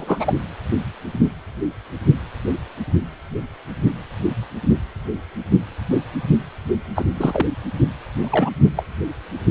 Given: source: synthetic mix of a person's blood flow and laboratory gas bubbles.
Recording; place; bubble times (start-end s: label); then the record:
Doppler ultrasound of blood flow; precordium
0.00-0.40 s: bubbles
6.95-7.04 s: bubbles
7.15-7.47 s: bubbles
8.19-8.53 s: bubbles
8.77-8.83 s: bubbles
From the record:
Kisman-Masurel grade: 222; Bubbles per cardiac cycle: several, 3 to 8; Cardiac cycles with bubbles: 10 to 50%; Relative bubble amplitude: moderate (0.250 to 0.450); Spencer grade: 2 (many but less than half of the cardiac periods contain bubble signals, singularly or in groups); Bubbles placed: anywhere in the cardiac cycle